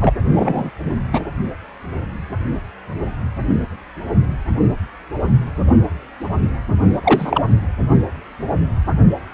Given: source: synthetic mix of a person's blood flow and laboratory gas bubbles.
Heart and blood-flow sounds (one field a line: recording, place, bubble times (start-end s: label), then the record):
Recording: Doppler ultrasound of blood flow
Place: precordium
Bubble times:
0.00-0.13 s: bubbles
0.32-0.70 s: bubbles
1.12-1.21 s: bubbles
7.04-7.45 s: bubbles
From the record:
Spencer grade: 2 (many but less than half of the cardiac periods contain bubble signals, singularly or in groups)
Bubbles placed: only in the low amplitude regions of the cardiac cycle